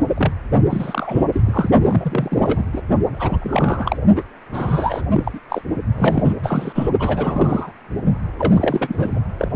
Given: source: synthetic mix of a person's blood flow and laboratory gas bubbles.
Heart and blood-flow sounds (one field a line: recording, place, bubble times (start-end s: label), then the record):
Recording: Doppler ultrasound of blood flow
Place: precordium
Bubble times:
0.17-0.33 s: bubbles
0.70-1.25 s: bubbles
1.32-1.42 s: bubbles
1.44-1.71 s: bubbles
1.83-2.65 s: bubbles
2.73-2.81 s: bubbles
3.08-3.97 s: bubbles
4.16-4.23 s: bubbles
4.51-5.02 s: bubbles
5.13-5.39 s: bubbles
5.49-5.62 s: bubbles
5.98-6.33 s: bubbles
6.43-6.89 s: bubbles
6.99-7.71 s: bubbles
8.38-9.20 s: bubbles
9.38-9.48 s: bubbles
From the record:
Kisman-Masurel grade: 342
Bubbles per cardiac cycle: rolling drumbeat, 9 or more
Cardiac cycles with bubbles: 100%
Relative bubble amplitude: moderate (0.250 to 0.450)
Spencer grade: 3 (all of the cardiac periods contain showers or single bubble signals, but not dominating or overriding the cardiac motion signals)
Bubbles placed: only in the low amplitude regions of the cardiac cycle